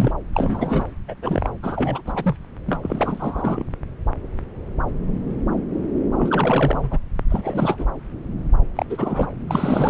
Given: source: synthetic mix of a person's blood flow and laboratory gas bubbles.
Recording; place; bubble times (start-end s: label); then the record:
Doppler ultrasound of blood flow; subclavian vein
0.00-0.12 s: bubbles
0.33-0.87 s: bubbles
1.08-1.14 s: bubbles
1.22-1.50 s: bubbles
1.62-2.01 s: bubbles
2.06-2.37 s: bubbles
2.66-3.64 s: bubbles
6.17-6.98 s: bubbles
7.29-7.85 s: bubbles
8.75-8.86 s: bubbles
8.89-9.27 s: bubbles
9.47-9.89 s: bubbles
From the record:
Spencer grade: 3 (all of the cardiac periods contain showers or single bubble signals, but not dominating or overriding the cardiac motion signals); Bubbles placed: anywhere in the cardiac cycle